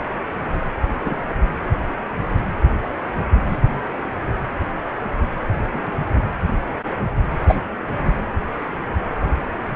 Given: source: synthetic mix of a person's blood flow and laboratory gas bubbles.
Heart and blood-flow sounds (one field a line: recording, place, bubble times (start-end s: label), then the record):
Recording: Doppler ultrasound of blood flow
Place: precordium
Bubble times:
1.00-1.34 s: bubbles
3.48-3.58 s: bubbles
5.73-5.91 s: bubbles
7.47-7.55 s: bubbles
From the record:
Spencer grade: 2 (many but less than half of the cardiac periods contain bubble signals, singularly or in groups)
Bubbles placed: anywhere in the cardiac cycle